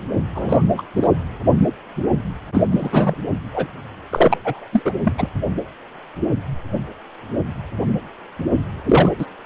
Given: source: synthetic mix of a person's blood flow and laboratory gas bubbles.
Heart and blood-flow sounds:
Doppler ultrasound of blood flow; precordium
0.35-0.63 s: bubbles
0.77-0.82 s: bubbles
0.96-1.07 s: bubbles
2.53-2.64 s: bubbles
2.69-3.16 s: bubbles
3.54-3.67 s: bubbles
4.11-4.37 s: bubbles
4.45-4.67 s: bubbles
4.72-4.82 s: bubbles
4.84-4.94 s: bubbles
5.04-5.12 s: bubbles
5.17-5.29 s: bubbles
8.85-9.09 s: bubbles
9.18-9.26 s: bubbles
From the record:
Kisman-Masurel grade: 223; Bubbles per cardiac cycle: several, 3 to 8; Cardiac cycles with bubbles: 10 to 50%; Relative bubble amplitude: loud (0.450 to 0.775); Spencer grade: 2 (many but less than half of the cardiac periods contain bubble signals, singularly or in groups); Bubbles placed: anywhere in the cardiac cycle

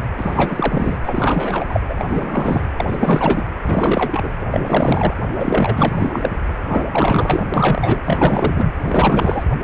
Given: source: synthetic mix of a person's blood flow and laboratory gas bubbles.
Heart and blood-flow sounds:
Doppler ultrasound of blood flow; precordium
0.17-0.98 s: bubbles
1.03-1.80 s: bubbles
1.89-1.94 s: bubbles
1.97-2.65 s: bubbles
2.77-3.47 s: bubbles
3.63-4.29 s: bubbles
4.41-4.46 s: bubbles
4.54-5.14 s: bubbles
5.35-6.29 s: bubbles
6.68-6.87 s: bubbles
6.92-7.48 s: bubbles
7.54-8.02 s: bubbles
8.05-8.72 s: bubbles
8.86-9.44 s: bubbles
From the record:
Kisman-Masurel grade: 444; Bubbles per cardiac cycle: continuous sound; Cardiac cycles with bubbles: 100%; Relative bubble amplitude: maximal (0.775 to 0.999); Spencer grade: 4 (maximum detectable bubble signal sounding continuously throughout systole and diastole of every cardiac period, and overriding the amplitude of the normal cardiac signals); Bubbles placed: anywhere in the cardiac cycle

